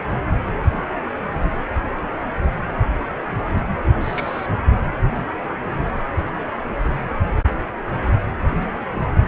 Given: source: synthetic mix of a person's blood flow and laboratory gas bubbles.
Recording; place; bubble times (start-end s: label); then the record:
Doppler ultrasound of blood flow; precordium
4.01-4.46 s: bubbles
From the record:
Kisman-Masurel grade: 111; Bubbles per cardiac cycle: 1 to 2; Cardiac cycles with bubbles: 1 to 10%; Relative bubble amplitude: barely perceptible (0.100 to 0.250); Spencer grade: 1 (occasional bubble signal discernible with the cardiac motion signal, with majority of cardiac periods free of bubbles); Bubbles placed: anywhere in the cardiac cycle